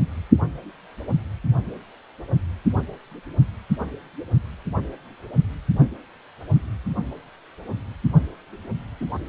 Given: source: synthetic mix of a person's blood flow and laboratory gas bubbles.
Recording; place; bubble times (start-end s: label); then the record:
Doppler ultrasound of blood flow; precordium
9.00-9.05 s: bubbles
From the record:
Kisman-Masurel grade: 122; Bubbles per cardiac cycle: 1 to 2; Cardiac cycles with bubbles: 10 to 50%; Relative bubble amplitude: moderate (0.250 to 0.450); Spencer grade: 2 (many but less than half of the cardiac periods contain bubble signals, singularly or in groups); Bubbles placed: only in the low amplitude regions of the cardiac cycle